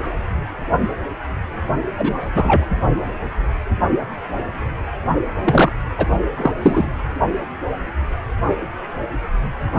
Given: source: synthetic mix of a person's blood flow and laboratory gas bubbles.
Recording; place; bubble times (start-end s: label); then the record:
Doppler ultrasound of blood flow; precordium
1.96-2.29 s: bubbles
2.35-2.68 s: bubbles
5.43-5.72 s: bubbles
5.97-6.06 s: bubbles
6.37-6.52 s: bubbles
6.62-6.89 s: bubbles
From the record:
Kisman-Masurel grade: 223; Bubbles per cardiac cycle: several, 3 to 8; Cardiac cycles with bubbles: 10 to 50%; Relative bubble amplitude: loud (0.450 to 0.775); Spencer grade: 2 (many but less than half of the cardiac periods contain bubble signals, singularly or in groups); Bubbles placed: only in the low amplitude regions of the cardiac cycle